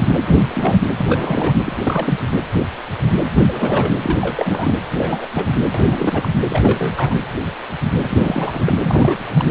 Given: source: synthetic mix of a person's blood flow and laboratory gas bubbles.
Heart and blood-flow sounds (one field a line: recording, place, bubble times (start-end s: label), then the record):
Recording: Doppler ultrasound of blood flow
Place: precordium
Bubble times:
0.11-0.18 s: bubbles
0.28-0.38 s: bubbles
0.48-0.77 s: bubbles
0.98-1.54 s: bubbles
1.64-2.19 s: bubbles
3.37-3.41 s: bubbles
3.47-3.92 s: bubbles
4.03-4.16 s: bubbles
4.21-4.74 s: bubbles
4.97-5.28 s: bubbles
5.34-5.57 s: bubbles
5.74-6.29 s: bubbles
6.49-7.16 s: bubbles
8.03-8.73 s: bubbles
8.83-9.25 s: bubbles
9.29-9.45 s: bubbles
From the record:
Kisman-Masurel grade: 332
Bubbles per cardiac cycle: rolling drumbeat, 9 or more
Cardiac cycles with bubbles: 50 to 99%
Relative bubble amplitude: moderate (0.250 to 0.450)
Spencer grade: 3 (all of the cardiac periods contain showers or single bubble signals, but not dominating or overriding the cardiac motion signals)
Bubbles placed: anywhere in the cardiac cycle